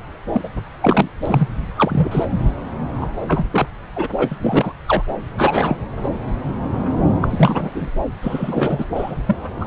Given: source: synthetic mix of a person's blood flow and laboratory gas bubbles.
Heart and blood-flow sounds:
Doppler ultrasound of blood flow; subclavian vein
0.32-0.41 s: bubbles
0.44-0.48 s: bubbles
0.81-1.08 s: bubbles
1.22-1.48 s: bubbles
1.76-2.25 s: bubbles
3.00-3.07 s: bubbles
3.28-3.46 s: bubbles
3.50-3.67 s: bubbles
3.96-4.08 s: bubbles
4.17-4.29 s: bubbles
4.31-4.35 s: bubbles
4.41-4.73 s: bubbles
4.87-5.02 s: bubbles
5.38-5.76 s: bubbles
6.04-6.08 s: bubbles
7.21-7.90 s: bubbles
8.22-8.85 s: bubbles
8.95-9.15 s: bubbles
9.27-9.38 s: bubbles
9.61-9.67 s: bubbles
From the record:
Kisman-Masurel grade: 233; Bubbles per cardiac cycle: several, 3 to 8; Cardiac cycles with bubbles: 50 to 99%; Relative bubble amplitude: loud (0.450 to 0.775); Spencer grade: 3 (all of the cardiac periods contain showers or single bubble signals, but not dominating or overriding the cardiac motion signals); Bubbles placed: anywhere in the cardiac cycle

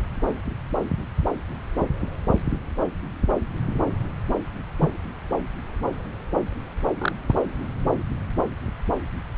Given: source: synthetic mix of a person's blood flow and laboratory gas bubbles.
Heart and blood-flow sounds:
Doppler ultrasound of blood flow; subclavian vein
4.80-4.90 s: bubbles
6.98-7.12 s: bubbles
7.29-7.33 s: bubbles
From the record:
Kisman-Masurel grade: 122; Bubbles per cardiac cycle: 1 to 2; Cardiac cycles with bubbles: 10 to 50%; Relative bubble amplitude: moderate (0.250 to 0.450); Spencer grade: 2 (many but less than half of the cardiac periods contain bubble signals, singularly or in groups); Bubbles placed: anywhere in the cardiac cycle

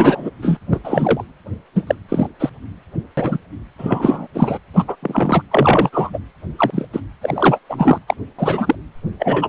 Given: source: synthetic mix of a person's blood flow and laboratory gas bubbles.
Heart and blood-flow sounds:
Doppler ultrasound of blood flow; precordium
0.00-0.30 s: bubbles
0.42-0.57 s: bubbles
0.71-0.80 s: bubbles
0.83-1.24 s: bubbles
1.75-1.84 s: bubbles
1.87-1.95 s: bubbles
2.08-2.27 s: bubbles
2.40-2.50 s: bubbles
3.17-3.39 s: bubbles
3.78-4.27 s: bubbles
4.34-4.58 s: bubbles
4.73-4.84 s: bubbles
4.87-4.96 s: bubbles
5.02-5.42 s: bubbles
5.51-5.90 s: bubbles
5.92-6.10 s: bubbles
6.13-6.18 s: bubbles
6.57-6.86 s: bubbles
6.92-7.00 s: bubbles
7.21-7.59 s: bubbles
7.69-7.98 s: bubbles
8.08-8.14 s: bubbles
8.38-8.76 s: bubbles
9.19-9.49 s: bubbles
From the record:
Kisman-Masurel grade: 243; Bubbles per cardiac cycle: several, 3 to 8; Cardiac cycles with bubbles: 100%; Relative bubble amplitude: loud (0.450 to 0.775); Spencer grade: 3 (all of the cardiac periods contain showers or single bubble signals, but not dominating or overriding the cardiac motion signals); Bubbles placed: anywhere in the cardiac cycle

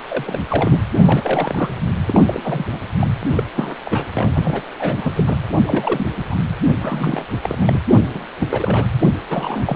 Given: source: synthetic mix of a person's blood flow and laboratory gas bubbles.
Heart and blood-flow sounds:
Doppler ultrasound of blood flow; precordium
0.08-0.40 s: bubbles
0.49-0.83 s: bubbles
1.03-1.70 s: bubbles
2.08-2.66 s: bubbles
2.72-2.80 s: bubbles
2.99-3.07 s: bubbles
3.36-3.44 s: bubbles
3.54-3.75 s: bubbles
3.84-4.07 s: bubbles
4.14-4.30 s: bubbles
4.34-4.62 s: bubbles
4.79-5.24 s: bubbles
5.26-5.38 s: bubbles
5.65-6.07 s: bubbles
6.15-6.23 s: bubbles
6.30-6.35 s: bubbles
6.66-6.76 s: bubbles
6.80-7.25 s: bubbles
7.43-7.79 s: bubbles
7.87-7.97 s: bubbles
8.14-8.24 s: bubbles
8.39-8.47 s: bubbles
8.50-8.86 s: bubbles
9.00-9.07 s: bubbles
9.30-9.76 s: bubbles
From the record:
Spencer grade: 3 (all of the cardiac periods contain showers or single bubble signals, but not dominating or overriding the cardiac motion signals); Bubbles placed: anywhere in the cardiac cycle

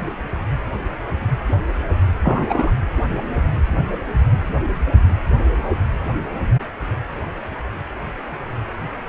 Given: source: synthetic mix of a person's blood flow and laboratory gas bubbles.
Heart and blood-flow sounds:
Doppler ultrasound of blood flow; precordium
2.23-2.71 s: bubbles
From the record:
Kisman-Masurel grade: 213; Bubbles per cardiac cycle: several, 3 to 8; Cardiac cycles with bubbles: 1 to 10%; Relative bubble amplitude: loud (0.450 to 0.775); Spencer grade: 1 (occasional bubble signal discernible with the cardiac motion signal, with majority of cardiac periods free of bubbles); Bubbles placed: anywhere in the cardiac cycle

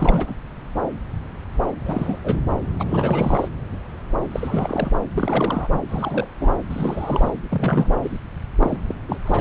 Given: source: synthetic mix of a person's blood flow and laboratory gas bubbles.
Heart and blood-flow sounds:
Doppler ultrasound of blood flow; subclavian vein
0.00-0.34 s: bubbles
1.85-2.18 s: bubbles
2.24-2.36 s: bubbles
2.77-2.85 s: bubbles
2.89-3.48 s: bubbles
4.30-4.92 s: bubbles
5.12-5.79 s: bubbles
5.88-6.29 s: bubbles
6.40-6.54 s: bubbles
6.70-7.32 s: bubbles
7.50-7.96 s: bubbles
8.02-8.18 s: bubbles
8.59-8.77 s: bubbles
8.86-8.95 s: bubbles
9.08-9.17 s: bubbles
9.25-9.41 s: bubbles
From the record:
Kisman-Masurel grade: 332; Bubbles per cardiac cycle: rolling drumbeat, 9 or more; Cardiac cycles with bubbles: 50 to 99%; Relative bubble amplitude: moderate (0.250 to 0.450); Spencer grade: 3 (all of the cardiac periods contain showers or single bubble signals, but not dominating or overriding the cardiac motion signals); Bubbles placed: anywhere in the cardiac cycle

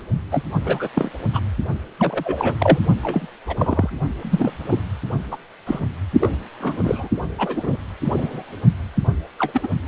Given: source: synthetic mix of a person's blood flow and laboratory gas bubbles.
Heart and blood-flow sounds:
Doppler ultrasound of blood flow; precordium
0.31-0.43 s: bubbles
0.64-0.89 s: bubbles
0.95-1.10 s: bubbles
1.33-1.42 s: bubbles
1.99-2.56 s: bubbles
2.58-2.79 s: bubbles
3.03-3.27 s: bubbles
3.47-3.90 s: bubbles
4.22-4.79 s: bubbles
5.31-5.37 s: bubbles
5.66-5.79 s: bubbles
6.20-6.36 s: bubbles
6.60-7.08 s: bubbles
7.38-7.77 s: bubbles
8.04-8.43 s: bubbles
9.38-9.67 s: bubbles
From the record:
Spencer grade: 3 (all of the cardiac periods contain showers or single bubble signals, but not dominating or overriding the cardiac motion signals); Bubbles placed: only in the low amplitude regions of the cardiac cycle

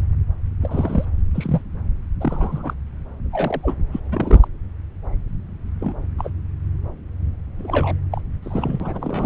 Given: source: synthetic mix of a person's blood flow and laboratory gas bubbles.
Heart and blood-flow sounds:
Doppler ultrasound of blood flow; subclavian vein
0.61-1.05 s: bubbles
1.34-1.61 s: bubbles
2.20-2.73 s: bubbles
3.32-3.75 s: bubbles
3.91-4.00 s: bubbles
4.12-4.48 s: bubbles
5.81-5.94 s: bubbles
6.18-6.30 s: bubbles
7.58-7.97 s: bubbles
8.11-8.21 s: bubbles
8.42-9.25 s: bubbles
From the record:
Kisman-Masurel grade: 232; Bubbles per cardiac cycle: several, 3 to 8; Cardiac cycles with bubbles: 50 to 99%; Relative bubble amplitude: moderate (0.250 to 0.450); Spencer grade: 3 (all of the cardiac periods contain showers or single bubble signals, but not dominating or overriding the cardiac motion signals); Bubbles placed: anywhere in the cardiac cycle

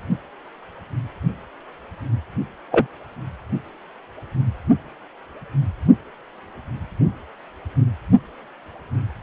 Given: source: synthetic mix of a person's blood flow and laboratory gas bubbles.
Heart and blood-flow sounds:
Doppler ultrasound of blood flow; precordium
2.71-2.87 s: bubbles
From the record:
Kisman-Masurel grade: 113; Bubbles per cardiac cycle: 1 to 2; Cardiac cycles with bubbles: 1 to 10%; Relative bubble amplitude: loud (0.450 to 0.775); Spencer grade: 1 (occasional bubble signal discernible with the cardiac motion signal, with majority of cardiac periods free of bubbles); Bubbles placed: anywhere in the cardiac cycle

